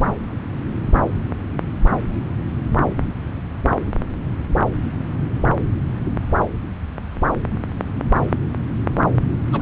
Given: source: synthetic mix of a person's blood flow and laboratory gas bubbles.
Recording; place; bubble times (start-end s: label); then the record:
Doppler ultrasound of blood flow; subclavian vein
9.51-9.62 s: bubbles
From the record:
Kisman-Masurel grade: 121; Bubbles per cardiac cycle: 1 to 2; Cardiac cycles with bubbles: 10 to 50%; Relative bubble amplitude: barely perceptible (0.100 to 0.250); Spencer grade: 2 (many but less than half of the cardiac periods contain bubble signals, singularly or in groups); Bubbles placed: anywhere in the cardiac cycle